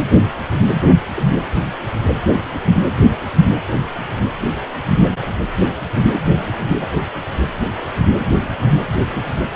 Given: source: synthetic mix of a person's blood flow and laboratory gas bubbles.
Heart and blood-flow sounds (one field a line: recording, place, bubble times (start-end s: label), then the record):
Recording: Doppler ultrasound of blood flow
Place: precordium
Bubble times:
1.16-1.23 s: bubbles
From the record:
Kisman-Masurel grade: 111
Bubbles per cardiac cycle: 1 to 2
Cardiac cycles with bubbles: 1 to 10%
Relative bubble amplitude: barely perceptible (0.100 to 0.250)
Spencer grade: 1 (occasional bubble signal discernible with the cardiac motion signal, with majority of cardiac periods free of bubbles)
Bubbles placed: anywhere in the cardiac cycle